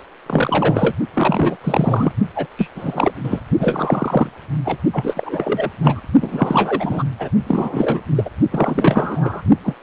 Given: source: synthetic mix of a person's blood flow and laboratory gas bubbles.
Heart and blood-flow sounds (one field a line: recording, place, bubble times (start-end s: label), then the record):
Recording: Doppler ultrasound of blood flow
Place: precordium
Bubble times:
0.26-0.95 s: bubbles
1.14-1.56 s: bubbles
1.64-2.13 s: bubbles
2.35-2.47 s: bubbles
2.57-2.69 s: bubbles
2.75-3.12 s: bubbles
3.23-3.40 s: bubbles
3.59-4.29 s: bubbles
4.65-4.78 s: bubbles
4.92-5.70 s: bubbles
5.81-6.01 s: bubbles
6.21-7.04 s: bubbles
7.18-7.29 s: bubbles
7.46-8.01 s: bubbles
8.15-8.29 s: bubbles
8.51-9.42 s: bubbles
9.63-9.74 s: bubbles
From the record:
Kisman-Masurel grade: 343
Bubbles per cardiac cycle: rolling drumbeat, 9 or more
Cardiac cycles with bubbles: 100%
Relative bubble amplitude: loud (0.450 to 0.775)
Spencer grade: 3 (all of the cardiac periods contain showers or single bubble signals, but not dominating or overriding the cardiac motion signals)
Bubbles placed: only in the low amplitude regions of the cardiac cycle